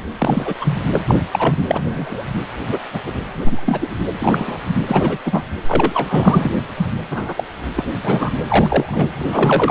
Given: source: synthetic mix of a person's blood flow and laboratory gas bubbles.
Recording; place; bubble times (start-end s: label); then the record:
Doppler ultrasound of blood flow; precordium
0.18-0.54 s: bubbles
0.60-0.78 s: bubbles
0.92-1.03 s: bubbles
1.08-1.22 s: bubbles
1.33-1.55 s: bubbles
1.67-2.25 s: bubbles
2.71-2.80 s: bubbles
2.93-3.01 s: bubbles
3.06-3.13 s: bubbles
3.45-3.89 s: bubbles
4.20-4.58 s: bubbles
4.86-5.17 s: bubbles
5.25-5.43 s: bubbles
5.66-6.51 s: bubbles
6.76-6.87 s: bubbles
7.11-7.33 s: bubbles
7.36-7.43 s: bubbles
7.75-7.85 s: bubbles
8.04-8.32 s: bubbles
8.47-9.11 s: bubbles
9.19-9.71 s: bubbles
From the record:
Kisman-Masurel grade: 243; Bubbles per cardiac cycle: several, 3 to 8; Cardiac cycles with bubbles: 100%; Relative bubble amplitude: loud (0.450 to 0.775); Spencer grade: 3 (all of the cardiac periods contain showers or single bubble signals, but not dominating or overriding the cardiac motion signals); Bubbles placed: anywhere in the cardiac cycle